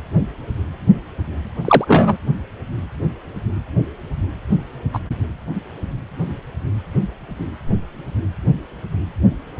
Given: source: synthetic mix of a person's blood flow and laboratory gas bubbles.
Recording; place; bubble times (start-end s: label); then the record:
Doppler ultrasound of blood flow; precordium
1.65-2.17 s: bubbles
4.93-4.99 s: bubbles
From the record:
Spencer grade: 2 (many but less than half of the cardiac periods contain bubble signals, singularly or in groups); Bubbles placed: anywhere in the cardiac cycle